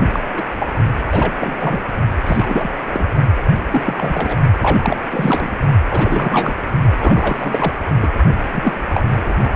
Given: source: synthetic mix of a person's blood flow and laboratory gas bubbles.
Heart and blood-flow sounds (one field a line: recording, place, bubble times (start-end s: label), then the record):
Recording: Doppler ultrasound of blood flow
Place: precordium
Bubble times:
0.14-0.20 s: bubbles
0.34-0.42 s: bubbles
0.57-0.67 s: bubbles
1.11-1.33 s: bubbles
1.41-1.54 s: bubbles
1.60-1.83 s: bubbles
2.23-2.69 s: bubbles
2.88-3.06 s: bubbles
3.36-3.43 s: bubbles
3.71-3.82 s: bubbles
3.85-4.38 s: bubbles
4.60-5.00 s: bubbles
5.10-5.50 s: bubbles
5.89-6.56 s: bubbles
7.00-7.73 s: bubbles
8.01-8.09 s: bubbles
8.52-8.73 s: bubbles
8.93-9.03 s: bubbles
9.17-9.33 s: bubbles
9.43-9.56 s: bubbles
From the record:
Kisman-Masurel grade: 343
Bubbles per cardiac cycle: rolling drumbeat, 9 or more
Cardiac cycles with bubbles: 100%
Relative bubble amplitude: loud (0.450 to 0.775)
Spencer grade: 3 (all of the cardiac periods contain showers or single bubble signals, but not dominating or overriding the cardiac motion signals)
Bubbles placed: only in the low amplitude regions of the cardiac cycle